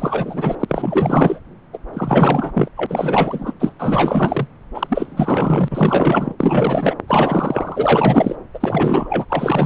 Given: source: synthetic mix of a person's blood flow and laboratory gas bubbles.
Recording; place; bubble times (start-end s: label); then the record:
Doppler ultrasound of blood flow; subclavian vein
0.00-0.65 s: bubbles
0.68-1.41 s: bubbles
1.73-1.78 s: bubbles
1.94-2.69 s: bubbles
2.76-3.54 s: bubbles
3.59-3.74 s: bubbles
3.79-4.47 s: bubbles
4.74-6.34 s: bubbles
6.39-6.96 s: bubbles
7.08-8.36 s: bubbles
8.54-9.26 s: bubbles
9.29-9.66 s: bubbles
From the record:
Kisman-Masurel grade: 444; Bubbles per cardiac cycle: continuous sound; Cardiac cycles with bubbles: 100%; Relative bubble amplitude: maximal (0.775 to 0.999); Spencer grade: 4 (maximum detectable bubble signal sounding continuously throughout systole and diastole of every cardiac period, and overriding the amplitude of the normal cardiac signals); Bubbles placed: anywhere in the cardiac cycle